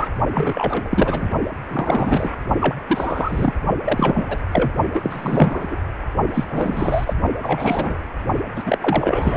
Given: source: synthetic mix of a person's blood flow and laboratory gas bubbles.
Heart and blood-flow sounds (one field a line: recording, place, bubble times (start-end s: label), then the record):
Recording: Doppler ultrasound of blood flow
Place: precordium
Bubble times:
0.00-0.08 s: bubbles
0.34-1.29 s: bubbles
1.69-2.31 s: bubbles
2.60-2.75 s: bubbles
2.87-3.54 s: bubbles
3.85-4.23 s: bubbles
4.27-4.39 s: bubbles
4.51-4.72 s: bubbles
4.93-5.79 s: bubbles
6.33-6.44 s: bubbles
6.49-7.13 s: bubbles
7.42-8.01 s: bubbles
8.56-8.78 s: bubbles
8.80-9.37 s: bubbles
From the record:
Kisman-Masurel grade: 343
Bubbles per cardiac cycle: rolling drumbeat, 9 or more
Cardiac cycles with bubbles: 100%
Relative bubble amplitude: loud (0.450 to 0.775)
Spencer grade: 3 (all of the cardiac periods contain showers or single bubble signals, but not dominating or overriding the cardiac motion signals)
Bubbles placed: only in the low amplitude regions of the cardiac cycle